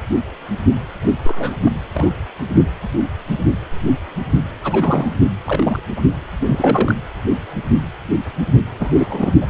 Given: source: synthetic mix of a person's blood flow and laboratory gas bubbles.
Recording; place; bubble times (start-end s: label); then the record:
Doppler ultrasound of blood flow; precordium
1.01-1.14 s: bubbles
1.24-1.56 s: bubbles
1.63-1.72 s: bubbles
1.94-2.10 s: bubbles
4.63-5.15 s: bubbles
5.45-5.79 s: bubbles
5.96-6.01 s: bubbles
6.41-6.95 s: bubbles
8.80-9.34 s: bubbles
9.41-9.46 s: bubbles
From the record:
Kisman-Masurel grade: 222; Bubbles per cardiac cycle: several, 3 to 8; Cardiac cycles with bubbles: 10 to 50%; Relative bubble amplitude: moderate (0.250 to 0.450); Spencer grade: 2 (many but less than half of the cardiac periods contain bubble signals, singularly or in groups); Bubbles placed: anywhere in the cardiac cycle